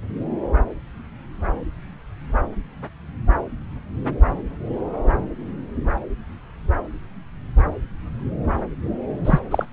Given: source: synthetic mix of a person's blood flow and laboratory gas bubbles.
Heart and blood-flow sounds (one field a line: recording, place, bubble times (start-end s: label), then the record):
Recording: Doppler ultrasound of blood flow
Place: subclavian vein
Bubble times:
9.25-9.39 s: bubbles
9.51-9.65 s: bubbles
From the record:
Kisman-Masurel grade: 113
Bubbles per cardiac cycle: 1 to 2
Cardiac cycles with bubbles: 1 to 10%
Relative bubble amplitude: loud (0.450 to 0.775)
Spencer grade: 1 (occasional bubble signal discernible with the cardiac motion signal, with majority of cardiac periods free of bubbles)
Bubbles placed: anywhere in the cardiac cycle